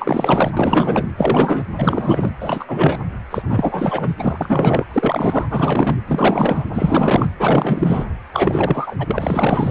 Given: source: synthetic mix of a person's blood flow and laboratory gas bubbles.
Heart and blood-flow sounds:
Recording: Doppler ultrasound of blood flow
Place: precordium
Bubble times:
0.00-0.52 s: bubbles
0.56-1.07 s: bubbles
1.17-1.64 s: bubbles
1.78-2.31 s: bubbles
2.40-3.00 s: bubbles
3.31-4.14 s: bubbles
4.19-4.38 s: bubbles
4.40-4.84 s: bubbles
4.90-5.45 s: bubbles
5.49-5.96 s: bubbles
6.07-6.66 s: bubbles
6.73-7.29 s: bubbles
7.38-8.05 s: bubbles
8.33-9.71 s: bubbles
From the record:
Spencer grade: 4 (maximum detectable bubble signal sounding continuously throughout systole and diastole of every cardiac period, and overriding the amplitude of the normal cardiac signals)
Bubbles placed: anywhere in the cardiac cycle

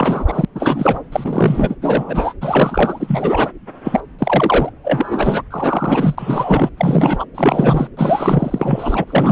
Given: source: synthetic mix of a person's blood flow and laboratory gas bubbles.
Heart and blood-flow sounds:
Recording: Doppler ultrasound of blood flow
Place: subclavian vein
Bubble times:
0.00-0.45 s: bubbles
0.55-0.99 s: bubbles
1.12-1.75 s: bubbles
1.81-2.33 s: bubbles
2.41-3.50 s: bubbles
3.83-4.00 s: bubbles
4.19-4.70 s: bubbles
4.84-5.43 s: bubbles
5.51-6.70 s: bubbles
6.77-7.25 s: bubbles
7.35-7.88 s: bubbles
7.97-9.04 s: bubbles
9.07-9.31 s: bubbles
From the record:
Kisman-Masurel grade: 343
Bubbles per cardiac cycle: rolling drumbeat, 9 or more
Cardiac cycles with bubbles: 100%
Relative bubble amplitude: loud (0.450 to 0.775)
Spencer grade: 3 (all of the cardiac periods contain showers or single bubble signals, but not dominating or overriding the cardiac motion signals)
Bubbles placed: anywhere in the cardiac cycle

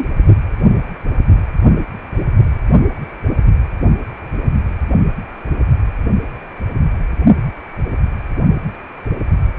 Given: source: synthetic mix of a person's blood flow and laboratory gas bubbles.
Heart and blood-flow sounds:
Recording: Doppler ultrasound of blood flow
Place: precordium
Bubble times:
0.00-0.09 s: bubbles
From the record:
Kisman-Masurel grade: 223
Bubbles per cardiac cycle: several, 3 to 8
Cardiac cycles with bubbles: 10 to 50%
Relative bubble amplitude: loud (0.450 to 0.775)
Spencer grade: 2 (many but less than half of the cardiac periods contain bubble signals, singularly or in groups)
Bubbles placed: only in the low amplitude regions of the cardiac cycle

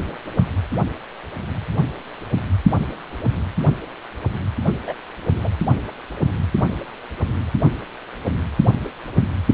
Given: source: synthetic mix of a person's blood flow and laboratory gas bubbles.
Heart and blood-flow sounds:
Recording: Doppler ultrasound of blood flow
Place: precordium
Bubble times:
4.87-4.94 s: bubbles
5.44-5.49 s: bubbles
From the record:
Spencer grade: 1 (occasional bubble signal discernible with the cardiac motion signal, with majority of cardiac periods free of bubbles)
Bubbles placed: anywhere in the cardiac cycle

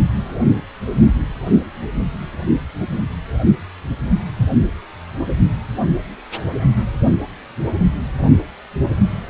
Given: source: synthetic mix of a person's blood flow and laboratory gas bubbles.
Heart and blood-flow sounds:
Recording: Doppler ultrasound of blood flow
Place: precordium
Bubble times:
4.66-4.72 s: bubbles
From the record:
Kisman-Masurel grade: 111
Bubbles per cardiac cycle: 1 to 2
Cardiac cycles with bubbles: 1 to 10%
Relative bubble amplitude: barely perceptible (0.100 to 0.250)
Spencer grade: 1 (occasional bubble signal discernible with the cardiac motion signal, with majority of cardiac periods free of bubbles)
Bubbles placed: only in the low amplitude regions of the cardiac cycle

